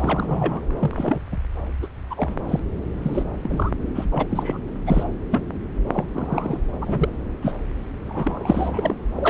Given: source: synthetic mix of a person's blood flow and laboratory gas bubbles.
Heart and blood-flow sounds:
Doppler ultrasound of blood flow; subclavian vein
0.00-0.61 s: bubbles
0.79-1.20 s: bubbles
1.31-1.37 s: bubbles
1.82-1.87 s: bubbles
2.10-2.36 s: bubbles
2.48-2.59 s: bubbles
3.03-3.23 s: bubbles
3.33-3.71 s: bubbles
3.95-4.06 s: bubbles
4.11-4.58 s: bubbles
4.86-5.08 s: bubbles
5.31-5.46 s: bubbles
5.92-6.04 s: bubbles
6.12-6.60 s: bubbles
6.81-7.09 s: bubbles
7.41-7.53 s: bubbles
8.06-8.95 s: bubbles
9.15-9.30 s: bubbles
From the record:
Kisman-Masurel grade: 243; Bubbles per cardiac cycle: several, 3 to 8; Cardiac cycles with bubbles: 100%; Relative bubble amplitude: loud (0.450 to 0.775); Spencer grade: 3 (all of the cardiac periods contain showers or single bubble signals, but not dominating or overriding the cardiac motion signals); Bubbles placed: anywhere in the cardiac cycle

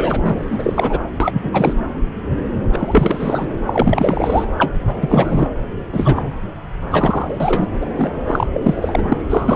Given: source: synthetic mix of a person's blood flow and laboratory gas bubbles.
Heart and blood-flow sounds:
Doppler ultrasound of blood flow; subclavian vein
0.00-1.01 s: bubbles
1.20-1.73 s: bubbles
2.73-3.46 s: bubbles
3.66-4.45 s: bubbles
4.58-4.73 s: bubbles
4.87-5.49 s: bubbles
5.92-6.32 s: bubbles
6.91-7.68 s: bubbles
7.81-7.86 s: bubbles
7.97-8.10 s: bubbles
8.27-8.47 s: bubbles
8.53-9.03 s: bubbles
9.09-9.17 s: bubbles
9.29-9.55 s: bubbles
From the record:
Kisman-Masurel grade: 333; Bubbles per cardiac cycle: rolling drumbeat, 9 or more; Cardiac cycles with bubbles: 50 to 99%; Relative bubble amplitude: loud (0.450 to 0.775); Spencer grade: 3 (all of the cardiac periods contain showers or single bubble signals, but not dominating or overriding the cardiac motion signals); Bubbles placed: anywhere in the cardiac cycle

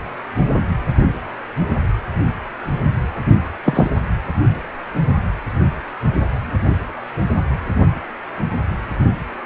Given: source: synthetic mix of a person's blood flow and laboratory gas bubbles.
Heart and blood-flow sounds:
Doppler ultrasound of blood flow; precordium
3.64-3.90 s: bubbles
From the record:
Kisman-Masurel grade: 123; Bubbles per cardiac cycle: 1 to 2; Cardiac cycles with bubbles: 10 to 50%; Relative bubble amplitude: loud (0.450 to 0.775); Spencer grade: 2 (many but less than half of the cardiac periods contain bubble signals, singularly or in groups); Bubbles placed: anywhere in the cardiac cycle

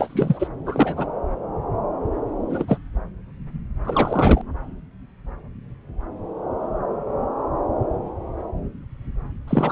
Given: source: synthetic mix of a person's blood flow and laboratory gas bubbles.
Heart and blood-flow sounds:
Doppler ultrasound of blood flow; subclavian vein
0.00-0.48 s: bubbles
0.66-1.08 s: bubbles
2.50-2.65 s: bubbles
2.67-2.78 s: bubbles
3.85-4.42 s: bubbles
9.47-9.72 s: bubbles
From the record:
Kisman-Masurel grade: 223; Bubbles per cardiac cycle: several, 3 to 8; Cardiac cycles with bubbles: 10 to 50%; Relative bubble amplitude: loud (0.450 to 0.775); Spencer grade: 2 (many but less than half of the cardiac periods contain bubble signals, singularly or in groups); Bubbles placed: anywhere in the cardiac cycle

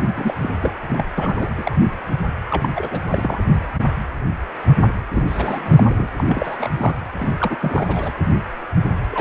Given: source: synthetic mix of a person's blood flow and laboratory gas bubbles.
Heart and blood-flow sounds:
Doppler ultrasound of blood flow; precordium
0.16-0.35 s: bubbles
0.41-0.53 s: bubbles
0.61-0.73 s: bubbles
0.89-1.05 s: bubbles
1.18-1.49 s: bubbles
1.57-1.77 s: bubbles
1.81-1.88 s: bubbles
2.50-2.69 s: bubbles
2.75-2.99 s: bubbles
3.10-3.42 s: bubbles
5.13-5.23 s: bubbles
5.27-5.83 s: bubbles
5.89-6.08 s: bubbles
6.18-6.95 s: bubbles
7.18-7.57 s: bubbles
7.61-8.15 s: bubbles
9.12-9.21 s: bubbles
From the record:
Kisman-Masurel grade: 332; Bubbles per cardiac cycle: rolling drumbeat, 9 or more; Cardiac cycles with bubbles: 50 to 99%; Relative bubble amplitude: moderate (0.250 to 0.450); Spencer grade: 3 (all of the cardiac periods contain showers or single bubble signals, but not dominating or overriding the cardiac motion signals); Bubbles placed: anywhere in the cardiac cycle

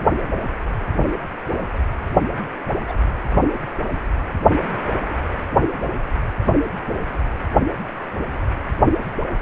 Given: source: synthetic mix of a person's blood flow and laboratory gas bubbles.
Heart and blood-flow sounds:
Doppler ultrasound of blood flow; precordium
2.88-2.92 s: bubbles
From the record:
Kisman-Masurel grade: 111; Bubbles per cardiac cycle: 1 to 2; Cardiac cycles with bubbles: 1 to 10%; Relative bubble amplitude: barely perceptible (0.100 to 0.250); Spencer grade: 1 (occasional bubble signal discernible with the cardiac motion signal, with majority of cardiac periods free of bubbles); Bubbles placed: only in the low amplitude regions of the cardiac cycle

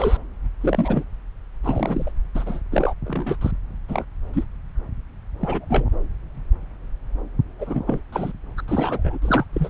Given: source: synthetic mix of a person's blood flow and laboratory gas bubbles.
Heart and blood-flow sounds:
Doppler ultrasound of blood flow; subclavian vein
0.00-0.17 s: bubbles
0.61-1.04 s: bubbles
1.64-2.12 s: bubbles
2.35-2.61 s: bubbles
2.71-2.94 s: bubbles
3.06-3.37 s: bubbles
3.41-3.52 s: bubbles
3.88-4.04 s: bubbles
4.33-4.44 s: bubbles
5.41-5.85 s: bubbles
7.59-7.81 s: bubbles
7.87-8.01 s: bubbles
8.12-8.32 s: bubbles
8.57-8.62 s: bubbles
8.68-9.18 s: bubbles
9.21-9.46 s: bubbles
9.53-9.69 s: bubbles
From the record:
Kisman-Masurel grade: 232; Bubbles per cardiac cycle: several, 3 to 8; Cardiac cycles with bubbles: 50 to 99%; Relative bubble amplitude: moderate (0.250 to 0.450); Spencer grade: 3 (all of the cardiac periods contain showers or single bubble signals, but not dominating or overriding the cardiac motion signals); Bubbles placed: anywhere in the cardiac cycle

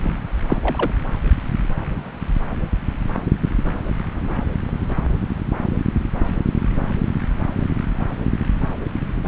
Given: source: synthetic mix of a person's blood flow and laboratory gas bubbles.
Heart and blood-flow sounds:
Doppler ultrasound of blood flow; subclavian vein
0.03-0.10 s: bubbles
0.47-0.57 s: bubbles
0.62-0.91 s: bubbles
From the record:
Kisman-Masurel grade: 222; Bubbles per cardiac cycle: several, 3 to 8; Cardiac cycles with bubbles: 10 to 50%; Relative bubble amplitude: moderate (0.250 to 0.450); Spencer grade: 2 (many but less than half of the cardiac periods contain bubble signals, singularly or in groups); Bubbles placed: anywhere in the cardiac cycle

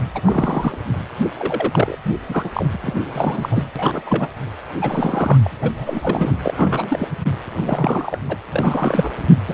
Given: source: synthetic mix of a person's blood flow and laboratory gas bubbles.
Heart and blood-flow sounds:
Doppler ultrasound of blood flow; precordium
0.15-0.21 s: bubbles
0.26-0.78 s: bubbles
1.34-1.98 s: bubbles
2.29-2.50 s: bubbles
2.54-2.66 s: bubbles
2.74-2.77 s: bubbles
2.81-2.94 s: bubbles
3.12-3.65 s: bubbles
3.75-4.02 s: bubbles
4.06-4.28 s: bubbles
4.81-5.38 s: bubbles
5.44-5.51 s: bubbles
5.62-5.72 s: bubbles
5.77-6.35 s: bubbles
6.42-7.09 s: bubbles
7.51-8.21 s: bubbles
8.29-8.37 s: bubbles
8.51-9.13 s: bubbles
9.47-9.54 s: bubbles
From the record:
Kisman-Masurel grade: 342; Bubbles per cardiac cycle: rolling drumbeat, 9 or more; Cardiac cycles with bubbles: 100%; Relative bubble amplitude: moderate (0.250 to 0.450); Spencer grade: 3 (all of the cardiac periods contain showers or single bubble signals, but not dominating or overriding the cardiac motion signals); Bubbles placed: anywhere in the cardiac cycle

